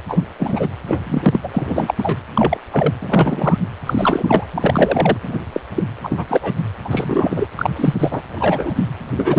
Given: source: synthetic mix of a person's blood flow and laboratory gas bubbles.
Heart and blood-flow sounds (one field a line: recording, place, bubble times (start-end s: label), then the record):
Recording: Doppler ultrasound of blood flow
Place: precordium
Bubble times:
0.08-0.23 s: bubbles
0.39-0.67 s: bubbles
0.87-1.02 s: bubbles
1.07-1.40 s: bubbles
1.43-1.51 s: bubbles
1.53-1.95 s: bubbles
1.98-2.16 s: bubbles
2.33-2.58 s: bubbles
2.71-2.94 s: bubbles
3.02-3.60 s: bubbles
3.85-4.48 s: bubbles
4.52-5.17 s: bubbles
5.21-5.38 s: bubbles
5.52-5.60 s: bubbles
5.74-5.83 s: bubbles
6.03-6.53 s: bubbles
6.84-7.47 s: bubbles
7.56-7.70 s: bubbles
7.75-7.94 s: bubbles
7.98-8.21 s: bubbles
8.29-8.72 s: bubbles
8.75-8.85 s: bubbles
9.15-9.38 s: bubbles
From the record:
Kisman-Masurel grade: 243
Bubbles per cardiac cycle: several, 3 to 8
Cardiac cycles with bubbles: 100%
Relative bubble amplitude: loud (0.450 to 0.775)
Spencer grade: 3 (all of the cardiac periods contain showers or single bubble signals, but not dominating or overriding the cardiac motion signals)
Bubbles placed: anywhere in the cardiac cycle